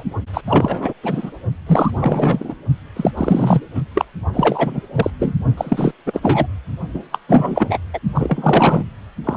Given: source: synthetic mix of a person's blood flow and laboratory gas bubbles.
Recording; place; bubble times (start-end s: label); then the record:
Doppler ultrasound of blood flow; precordium
0.00-0.03 s: bubbles
0.33-0.41 s: bubbles
0.47-0.93 s: bubbles
1.03-1.31 s: bubbles
1.67-1.91 s: bubbles
2.00-2.54 s: bubbles
2.96-3.11 s: bubbles
3.17-3.60 s: bubbles
3.75-3.81 s: bubbles
3.94-4.05 s: bubbles
4.33-4.80 s: bubbles
4.95-5.10 s: bubbles
5.19-5.35 s: bubbles
5.57-5.92 s: bubbles
6.05-6.20 s: bubbles
6.22-6.47 s: bubbles
6.93-7.02 s: bubbles
7.12-7.18 s: bubbles
7.28-7.78 s: bubbles
7.94-7.99 s: bubbles
8.15-8.83 s: bubbles
9.23-9.37 s: bubbles
From the record:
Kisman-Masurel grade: 333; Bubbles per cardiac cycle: rolling drumbeat, 9 or more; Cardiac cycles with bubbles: 50 to 99%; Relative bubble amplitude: loud (0.450 to 0.775); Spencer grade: 3 (all of the cardiac periods contain showers or single bubble signals, but not dominating or overriding the cardiac motion signals); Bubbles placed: only in the low amplitude regions of the cardiac cycle